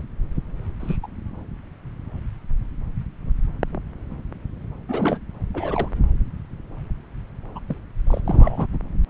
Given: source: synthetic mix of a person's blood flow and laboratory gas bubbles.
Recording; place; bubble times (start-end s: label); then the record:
Doppler ultrasound of blood flow; subclavian vein
0.79-0.97 s: bubbles
1.02-1.07 s: bubbles
4.88-5.19 s: bubbles
5.54-5.89 s: bubbles
7.55-7.59 s: bubbles
7.68-7.77 s: bubbles
8.06-8.21 s: bubbles
8.24-8.66 s: bubbles
8.72-8.78 s: bubbles
From the record:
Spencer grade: 2 (many but less than half of the cardiac periods contain bubble signals, singularly or in groups); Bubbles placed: anywhere in the cardiac cycle